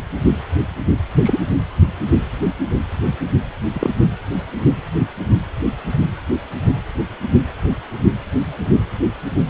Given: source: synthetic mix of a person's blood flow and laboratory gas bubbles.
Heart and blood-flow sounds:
Doppler ultrasound of blood flow; precordium
1.23-1.39 s: bubbles
3.72-3.91 s: bubbles
From the record:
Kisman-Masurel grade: 123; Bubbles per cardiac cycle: 1 to 2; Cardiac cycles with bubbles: 10 to 50%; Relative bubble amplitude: loud (0.450 to 0.775); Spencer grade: 2 (many but less than half of the cardiac periods contain bubble signals, singularly or in groups); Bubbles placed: anywhere in the cardiac cycle

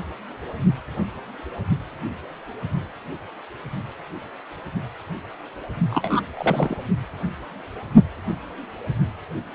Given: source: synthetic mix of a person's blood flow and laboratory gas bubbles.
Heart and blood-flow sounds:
Doppler ultrasound of blood flow; precordium
5.90-6.21 s: bubbles
6.37-6.75 s: bubbles
From the record:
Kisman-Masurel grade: 212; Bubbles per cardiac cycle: several, 3 to 8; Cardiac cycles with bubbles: 1 to 10%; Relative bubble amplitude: moderate (0.250 to 0.450); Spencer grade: 1 (occasional bubble signal discernible with the cardiac motion signal, with majority of cardiac periods free of bubbles); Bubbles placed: only in the low amplitude regions of the cardiac cycle

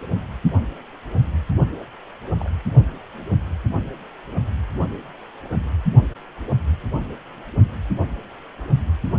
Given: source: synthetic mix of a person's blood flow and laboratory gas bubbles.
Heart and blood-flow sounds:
Doppler ultrasound of blood flow; precordium
2.40-2.51 s: bubbles
From the record:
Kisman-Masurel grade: 121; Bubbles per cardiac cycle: 1 to 2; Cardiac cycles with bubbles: 10 to 50%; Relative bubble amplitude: barely perceptible (0.100 to 0.250); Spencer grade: 2 (many but less than half of the cardiac periods contain bubble signals, singularly or in groups); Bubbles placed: only in the low amplitude regions of the cardiac cycle

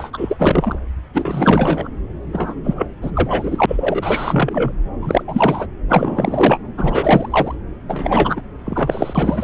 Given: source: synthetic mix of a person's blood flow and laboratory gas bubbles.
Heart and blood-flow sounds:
Doppler ultrasound of blood flow; subclavian vein
0.00-0.11 s: bubbles
0.13-0.79 s: bubbles
1.13-1.89 s: bubbles
2.32-2.54 s: bubbles
2.63-2.86 s: bubbles
3.01-3.11 s: bubbles
3.14-4.72 s: bubbles
5.01-5.22 s: bubbles
5.27-5.67 s: bubbles
5.88-6.59 s: bubbles
6.77-7.54 s: bubbles
7.89-8.42 s: bubbles
8.66-9.44 s: bubbles
From the record:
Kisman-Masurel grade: 333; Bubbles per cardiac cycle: rolling drumbeat, 9 or more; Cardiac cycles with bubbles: 50 to 99%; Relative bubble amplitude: loud (0.450 to 0.775); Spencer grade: 3 (all of the cardiac periods contain showers or single bubble signals, but not dominating or overriding the cardiac motion signals); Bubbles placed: anywhere in the cardiac cycle

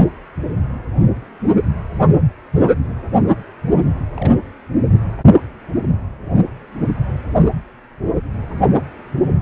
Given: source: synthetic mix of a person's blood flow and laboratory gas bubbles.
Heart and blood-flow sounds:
Doppler ultrasound of blood flow; precordium
4.16-4.33 s: bubbles
From the record:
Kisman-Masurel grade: 121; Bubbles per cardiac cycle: 1 to 2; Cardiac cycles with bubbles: 10 to 50%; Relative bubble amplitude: barely perceptible (0.100 to 0.250); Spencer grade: 2 (many but less than half of the cardiac periods contain bubble signals, singularly or in groups); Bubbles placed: only in the low amplitude regions of the cardiac cycle

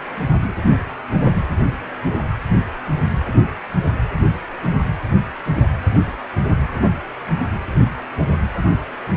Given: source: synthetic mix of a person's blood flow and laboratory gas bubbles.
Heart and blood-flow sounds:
Doppler ultrasound of blood flow; precordium
4.63-4.67 s: bubbles
From the record:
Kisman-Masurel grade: 111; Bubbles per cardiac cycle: 1 to 2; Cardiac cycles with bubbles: 1 to 10%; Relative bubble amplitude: barely perceptible (0.100 to 0.250); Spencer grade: 1 (occasional bubble signal discernible with the cardiac motion signal, with majority of cardiac periods free of bubbles); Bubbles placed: anywhere in the cardiac cycle

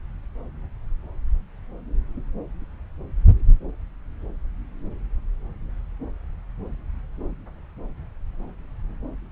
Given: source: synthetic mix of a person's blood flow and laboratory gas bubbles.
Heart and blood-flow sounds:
Doppler ultrasound of blood flow; subclavian vein
no bubbles
From the record:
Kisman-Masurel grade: 000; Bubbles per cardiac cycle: 0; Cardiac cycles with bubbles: 0%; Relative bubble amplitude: no bubbles discernible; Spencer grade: 0 (complete lack of bubble signals)

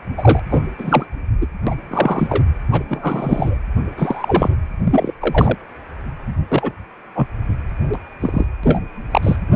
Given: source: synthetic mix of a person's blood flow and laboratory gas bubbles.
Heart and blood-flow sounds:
Doppler ultrasound of blood flow; precordium
0.17-0.39 s: bubbles
0.50-0.61 s: bubbles
0.78-1.06 s: bubbles
1.41-1.46 s: bubbles
1.67-1.75 s: bubbles
1.90-2.44 s: bubbles
2.71-2.84 s: bubbles
2.88-3.57 s: bubbles
3.97-4.50 s: bubbles
4.84-5.12 s: bubbles
5.21-5.57 s: bubbles
6.48-6.73 s: bubbles
7.15-7.28 s: bubbles
7.93-7.98 s: bubbles
8.20-8.46 s: bubbles
8.63-8.79 s: bubbles
9.11-9.36 s: bubbles
From the record:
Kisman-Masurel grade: 233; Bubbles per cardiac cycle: several, 3 to 8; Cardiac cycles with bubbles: 50 to 99%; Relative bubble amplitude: loud (0.450 to 0.775); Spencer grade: 3 (all of the cardiac periods contain showers or single bubble signals, but not dominating or overriding the cardiac motion signals); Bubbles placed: anywhere in the cardiac cycle

